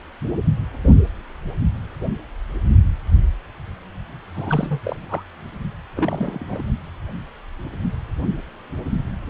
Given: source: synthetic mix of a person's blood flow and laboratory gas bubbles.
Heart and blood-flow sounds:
Doppler ultrasound of blood flow; precordium
4.33-4.80 s: bubbles
4.83-5.25 s: bubbles
5.95-6.66 s: bubbles
From the record:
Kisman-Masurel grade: 221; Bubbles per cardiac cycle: several, 3 to 8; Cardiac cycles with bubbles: 10 to 50%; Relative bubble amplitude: barely perceptible (0.100 to 0.250); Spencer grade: 2 (many but less than half of the cardiac periods contain bubble signals, singularly or in groups); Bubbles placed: only in the low amplitude regions of the cardiac cycle

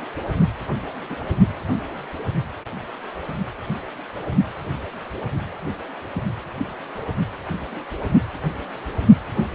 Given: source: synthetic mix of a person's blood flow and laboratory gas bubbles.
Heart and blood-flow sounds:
Doppler ultrasound of blood flow; precordium
1.09-1.17 s: bubbles
From the record:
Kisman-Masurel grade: 111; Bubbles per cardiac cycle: 1 to 2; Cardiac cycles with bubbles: 1 to 10%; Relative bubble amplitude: barely perceptible (0.100 to 0.250); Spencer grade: 1 (occasional bubble signal discernible with the cardiac motion signal, with majority of cardiac periods free of bubbles); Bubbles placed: only in the low amplitude regions of the cardiac cycle

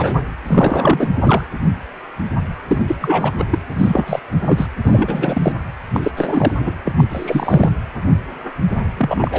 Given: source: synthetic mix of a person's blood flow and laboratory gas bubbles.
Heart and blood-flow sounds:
Doppler ultrasound of blood flow; precordium
0.00-0.20 s: bubbles
0.47-1.08 s: bubbles
1.24-1.43 s: bubbles
2.67-2.82 s: bubbles
2.87-2.96 s: bubbles
3.00-3.32 s: bubbles
3.38-3.45 s: bubbles
3.50-3.58 s: bubbles
3.69-4.20 s: bubbles
4.42-4.67 s: bubbles
4.83-5.52 s: bubbles
5.93-6.12 s: bubbles
6.17-6.54 s: bubbles
6.60-6.75 s: bubbles
6.85-6.93 s: bubbles
6.97-7.04 s: bubbles
7.09-7.70 s: bubbles
8.97-9.39 s: bubbles
From the record:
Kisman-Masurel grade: 333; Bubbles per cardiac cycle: rolling drumbeat, 9 or more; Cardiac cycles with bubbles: 50 to 99%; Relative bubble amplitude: loud (0.450 to 0.775); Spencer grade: 3 (all of the cardiac periods contain showers or single bubble signals, but not dominating or overriding the cardiac motion signals); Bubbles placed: anywhere in the cardiac cycle

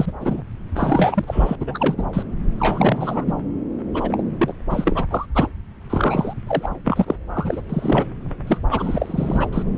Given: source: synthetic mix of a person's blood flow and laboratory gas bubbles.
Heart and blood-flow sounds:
Doppler ultrasound of blood flow; subclavian vein
0.00-0.12 s: bubbles
0.20-0.42 s: bubbles
0.75-1.24 s: bubbles
1.27-1.55 s: bubbles
1.60-1.95 s: bubbles
1.97-2.06 s: bubbles
2.13-2.23 s: bubbles
2.58-3.33 s: bubbles
3.94-4.23 s: bubbles
4.38-4.54 s: bubbles
4.70-5.05 s: bubbles
5.11-5.26 s: bubbles
5.34-5.49 s: bubbles
5.90-6.33 s: bubbles
6.47-6.70 s: bubbles
6.84-7.16 s: bubbles
7.34-7.62 s: bubbles
7.70-8.06 s: bubbles
8.47-8.60 s: bubbles
8.70-9.46 s: bubbles
9.52-9.62 s: bubbles
From the record:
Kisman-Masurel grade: 342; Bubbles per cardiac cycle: rolling drumbeat, 9 or more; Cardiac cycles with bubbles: 100%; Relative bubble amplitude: moderate (0.250 to 0.450); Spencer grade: 3 (all of the cardiac periods contain showers or single bubble signals, but not dominating or overriding the cardiac motion signals); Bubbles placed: anywhere in the cardiac cycle

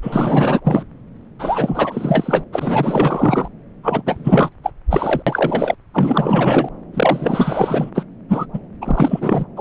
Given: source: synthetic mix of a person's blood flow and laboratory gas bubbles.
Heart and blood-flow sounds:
Doppler ultrasound of blood flow; subclavian vein
0.02-0.61 s: bubbles
0.64-0.83 s: bubbles
1.39-2.42 s: bubbles
2.52-3.48 s: bubbles
3.83-4.02 s: bubbles
4.06-4.50 s: bubbles
4.63-4.72 s: bubbles
4.89-5.22 s: bubbles
5.26-5.75 s: bubbles
5.93-6.69 s: bubbles
6.93-7.91 s: bubbles
7.95-8.04 s: bubbles
8.29-8.46 s: bubbles
8.53-8.59 s: bubbles
8.81-9.45 s: bubbles
9.56-9.61 s: bubbles
From the record:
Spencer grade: 4 (maximum detectable bubble signal sounding continuously throughout systole and diastole of every cardiac period, and overriding the amplitude of the normal cardiac signals); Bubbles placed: anywhere in the cardiac cycle

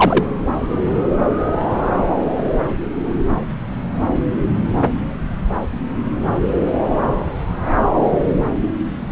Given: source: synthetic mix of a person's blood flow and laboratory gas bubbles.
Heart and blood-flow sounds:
Doppler ultrasound of blood flow; subclavian vein
0.00-0.26 s: bubbles
From the record:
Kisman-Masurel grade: 113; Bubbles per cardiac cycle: 1 to 2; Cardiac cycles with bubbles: 1 to 10%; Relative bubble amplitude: loud (0.450 to 0.775); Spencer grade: 1 (occasional bubble signal discernible with the cardiac motion signal, with majority of cardiac periods free of bubbles); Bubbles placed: anywhere in the cardiac cycle

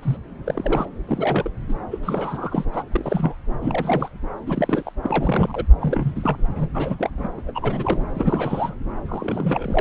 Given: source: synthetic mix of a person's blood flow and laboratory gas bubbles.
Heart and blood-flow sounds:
Doppler ultrasound of blood flow; subclavian vein
0.00-0.16 s: bubbles
0.45-0.85 s: bubbles
1.07-1.50 s: bubbles
1.68-1.75 s: bubbles
1.90-2.65 s: bubbles
2.73-2.83 s: bubbles
2.92-3.35 s: bubbles
3.61-4.19 s: bubbles
4.46-4.92 s: bubbles
5.03-5.64 s: bubbles
5.81-6.38 s: bubbles
6.56-6.67 s: bubbles
6.74-7.10 s: bubbles
7.17-7.29 s: bubbles
7.37-7.41 s: bubbles
7.47-8.04 s: bubbles
8.15-8.77 s: bubbles
9.08-9.81 s: bubbles
From the record:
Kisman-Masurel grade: 342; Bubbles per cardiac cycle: rolling drumbeat, 9 or more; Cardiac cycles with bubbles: 100%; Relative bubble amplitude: moderate (0.250 to 0.450); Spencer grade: 3 (all of the cardiac periods contain showers or single bubble signals, but not dominating or overriding the cardiac motion signals); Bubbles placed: anywhere in the cardiac cycle

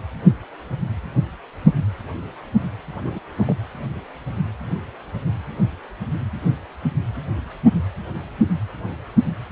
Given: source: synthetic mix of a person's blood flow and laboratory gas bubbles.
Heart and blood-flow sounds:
Doppler ultrasound of blood flow; precordium
3.05-3.19 s: bubbles
3.36-3.58 s: bubbles
From the record:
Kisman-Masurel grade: 211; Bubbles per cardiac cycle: several, 3 to 8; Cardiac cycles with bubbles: 1 to 10%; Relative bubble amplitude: barely perceptible (0.100 to 0.250); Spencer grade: 1 (occasional bubble signal discernible with the cardiac motion signal, with majority of cardiac periods free of bubbles); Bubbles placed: anywhere in the cardiac cycle

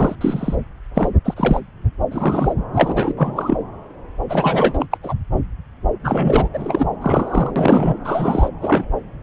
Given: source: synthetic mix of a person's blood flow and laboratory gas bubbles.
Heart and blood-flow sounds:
Doppler ultrasound of blood flow; subclavian vein
0.00-0.15 s: bubbles
0.21-0.57 s: bubbles
0.94-1.10 s: bubbles
1.25-1.34 s: bubbles
1.36-1.60 s: bubbles
2.10-2.54 s: bubbles
2.73-3.14 s: bubbles
3.17-3.58 s: bubbles
4.29-4.86 s: bubbles
4.91-4.97 s: bubbles
5.03-5.14 s: bubbles
6.04-6.49 s: bubbles
6.54-6.87 s: bubbles
7.01-7.51 s: bubbles
7.55-7.96 s: bubbles
8.04-8.49 s: bubbles
8.61-8.85 s: bubbles
From the record:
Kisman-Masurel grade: 233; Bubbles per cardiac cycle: several, 3 to 8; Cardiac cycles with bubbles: 50 to 99%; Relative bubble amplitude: loud (0.450 to 0.775); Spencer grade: 3 (all of the cardiac periods contain showers or single bubble signals, but not dominating or overriding the cardiac motion signals); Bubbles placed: anywhere in the cardiac cycle

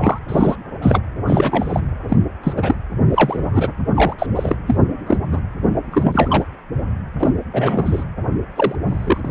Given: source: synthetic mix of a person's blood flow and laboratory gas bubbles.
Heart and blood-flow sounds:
Doppler ultrasound of blood flow; precordium
0.00-0.18 s: bubbles
0.28-0.55 s: bubbles
0.81-1.00 s: bubbles
1.27-1.80 s: bubbles
2.08-2.17 s: bubbles
2.43-2.54 s: bubbles
2.56-2.76 s: bubbles
3.10-3.69 s: bubbles
3.94-4.14 s: bubbles
4.18-4.26 s: bubbles
4.35-4.56 s: bubbles
4.67-4.77 s: bubbles
5.06-5.17 s: bubbles
5.31-5.42 s: bubbles
5.90-6.44 s: bubbles
7.19-7.29 s: bubbles
7.53-8.04 s: bubbles
8.56-8.76 s: bubbles
8.88-9.21 s: bubbles
9.24-9.31 s: bubbles
From the record:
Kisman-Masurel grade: 243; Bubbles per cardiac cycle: several, 3 to 8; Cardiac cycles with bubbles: 100%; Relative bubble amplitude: loud (0.450 to 0.775); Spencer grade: 3 (all of the cardiac periods contain showers or single bubble signals, but not dominating or overriding the cardiac motion signals); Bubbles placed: anywhere in the cardiac cycle

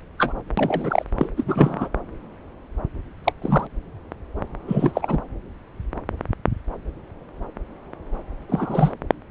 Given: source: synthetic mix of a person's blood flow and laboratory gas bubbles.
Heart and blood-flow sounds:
Doppler ultrasound of blood flow; subclavian vein
0.18-0.33 s: bubbles
0.57-1.04 s: bubbles
1.16-1.29 s: bubbles
1.36-1.89 s: bubbles
3.24-3.33 s: bubbles
3.42-3.67 s: bubbles
4.67-5.19 s: bubbles
8.48-8.95 s: bubbles
From the record:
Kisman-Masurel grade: 222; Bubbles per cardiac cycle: several, 3 to 8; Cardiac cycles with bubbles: 10 to 50%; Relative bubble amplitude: moderate (0.250 to 0.450); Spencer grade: 2 (many but less than half of the cardiac periods contain bubble signals, singularly or in groups); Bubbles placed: anywhere in the cardiac cycle

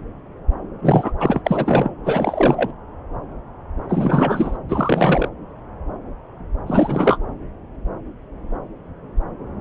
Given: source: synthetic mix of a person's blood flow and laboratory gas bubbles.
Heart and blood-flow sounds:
Doppler ultrasound of blood flow; subclavian vein
0.81-1.12 s: bubbles
1.20-1.41 s: bubbles
1.45-1.93 s: bubbles
2.04-2.71 s: bubbles
3.88-4.58 s: bubbles
4.69-5.29 s: bubbles
6.67-7.19 s: bubbles
From the record:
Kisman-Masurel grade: 333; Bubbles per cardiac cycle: rolling drumbeat, 9 or more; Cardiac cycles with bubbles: 50 to 99%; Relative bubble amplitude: loud (0.450 to 0.775); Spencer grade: 3 (all of the cardiac periods contain showers or single bubble signals, but not dominating or overriding the cardiac motion signals); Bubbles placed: anywhere in the cardiac cycle

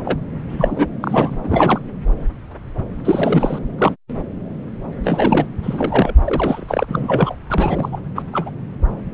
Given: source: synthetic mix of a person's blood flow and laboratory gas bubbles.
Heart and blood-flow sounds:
Doppler ultrasound of blood flow; subclavian vein
0.05-0.19 s: bubbles
0.48-0.87 s: bubbles
1.00-1.36 s: bubbles
1.43-1.80 s: bubbles
3.04-3.58 s: bubbles
3.78-3.96 s: bubbles
5.04-5.48 s: bubbles
5.62-6.15 s: bubbles
6.25-6.85 s: bubbles
6.88-7.35 s: bubbles
7.49-7.99 s: bubbles
8.15-8.22 s: bubbles
8.33-8.51 s: bubbles
From the record:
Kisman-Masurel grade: 232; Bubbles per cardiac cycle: several, 3 to 8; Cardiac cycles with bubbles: 50 to 99%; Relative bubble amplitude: moderate (0.250 to 0.450); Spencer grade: 3 (all of the cardiac periods contain showers or single bubble signals, but not dominating or overriding the cardiac motion signals); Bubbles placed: anywhere in the cardiac cycle

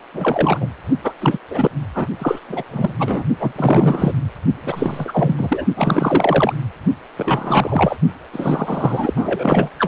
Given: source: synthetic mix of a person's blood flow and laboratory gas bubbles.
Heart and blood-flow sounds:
Doppler ultrasound of blood flow; precordium
0.13-0.69 s: bubbles
1.03-1.13 s: bubbles
1.20-1.38 s: bubbles
1.50-1.70 s: bubbles
1.94-2.07 s: bubbles
2.18-2.40 s: bubbles
2.48-2.64 s: bubbles
2.68-2.95 s: bubbles
2.98-3.24 s: bubbles
3.40-3.52 s: bubbles
3.55-4.13 s: bubbles
4.62-5.65 s: bubbles
5.76-6.53 s: bubbles
7.17-7.96 s: bubbles
8.32-9.13 s: bubbles
9.16-9.70 s: bubbles
9.78-9.88 s: bubbles
From the record:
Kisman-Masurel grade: 333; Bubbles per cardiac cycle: rolling drumbeat, 9 or more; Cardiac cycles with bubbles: 50 to 99%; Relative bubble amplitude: loud (0.450 to 0.775); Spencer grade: 3 (all of the cardiac periods contain showers or single bubble signals, but not dominating or overriding the cardiac motion signals); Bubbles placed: only in the low amplitude regions of the cardiac cycle

